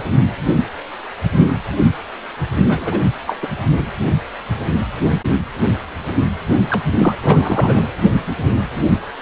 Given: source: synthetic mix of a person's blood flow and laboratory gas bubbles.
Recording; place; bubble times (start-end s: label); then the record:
Doppler ultrasound of blood flow; precordium
2.69-3.00 s: bubbles
3.27-3.48 s: bubbles
6.70-6.82 s: bubbles
6.98-7.14 s: bubbles
7.22-7.88 s: bubbles
From the record:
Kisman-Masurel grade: 223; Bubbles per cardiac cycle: several, 3 to 8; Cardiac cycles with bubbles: 10 to 50%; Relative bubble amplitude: loud (0.450 to 0.775); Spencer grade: 2 (many but less than half of the cardiac periods contain bubble signals, singularly or in groups); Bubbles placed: only in the low amplitude regions of the cardiac cycle